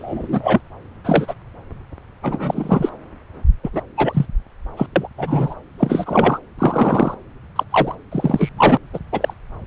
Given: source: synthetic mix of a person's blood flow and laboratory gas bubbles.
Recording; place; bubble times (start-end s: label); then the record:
Doppler ultrasound of blood flow; subclavian vein
0.00-0.61 s: bubbles
1.04-1.34 s: bubbles
2.22-2.92 s: bubbles
3.63-3.70 s: bubbles
3.73-3.81 s: bubbles
3.96-4.26 s: bubbles
4.76-4.87 s: bubbles
4.96-5.08 s: bubbles
5.17-5.54 s: bubbles
5.78-6.39 s: bubbles
6.58-7.14 s: bubbles
7.55-7.63 s: bubbles
7.71-7.95 s: bubbles
8.12-8.49 s: bubbles
8.56-8.78 s: bubbles
8.93-8.99 s: bubbles
9.12-9.33 s: bubbles
From the record:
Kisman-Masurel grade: 243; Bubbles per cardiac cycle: several, 3 to 8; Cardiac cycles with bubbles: 100%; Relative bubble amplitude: loud (0.450 to 0.775); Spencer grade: 3 (all of the cardiac periods contain showers or single bubble signals, but not dominating or overriding the cardiac motion signals); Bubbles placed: anywhere in the cardiac cycle